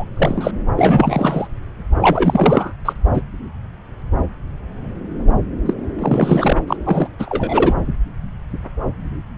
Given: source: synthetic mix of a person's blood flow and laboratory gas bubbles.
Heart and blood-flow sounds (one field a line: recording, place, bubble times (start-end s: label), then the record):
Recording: Doppler ultrasound of blood flow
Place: subclavian vein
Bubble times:
0.00-0.04 s: bubbles
0.14-0.51 s: bubbles
0.76-1.48 s: bubbles
2.01-2.73 s: bubbles
2.85-2.93 s: bubbles
3.14-3.21 s: bubbles
5.65-5.73 s: bubbles
5.98-6.57 s: bubbles
6.67-6.76 s: bubbles
6.85-7.07 s: bubbles
7.19-7.74 s: bubbles
From the record:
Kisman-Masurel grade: 333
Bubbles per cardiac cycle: rolling drumbeat, 9 or more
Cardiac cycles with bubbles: 50 to 99%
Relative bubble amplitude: loud (0.450 to 0.775)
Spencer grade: 3 (all of the cardiac periods contain showers or single bubble signals, but not dominating or overriding the cardiac motion signals)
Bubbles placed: anywhere in the cardiac cycle